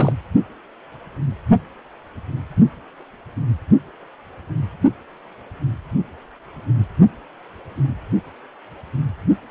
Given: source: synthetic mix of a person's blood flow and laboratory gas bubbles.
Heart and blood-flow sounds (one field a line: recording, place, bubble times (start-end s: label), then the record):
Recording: Doppler ultrasound of blood flow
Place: precordium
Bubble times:
0.00-0.12 s: bubbles
From the record:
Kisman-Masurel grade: 222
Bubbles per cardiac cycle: several, 3 to 8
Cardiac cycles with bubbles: 10 to 50%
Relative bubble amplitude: moderate (0.250 to 0.450)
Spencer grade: 2 (many but less than half of the cardiac periods contain bubble signals, singularly or in groups)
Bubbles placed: only in the low amplitude regions of the cardiac cycle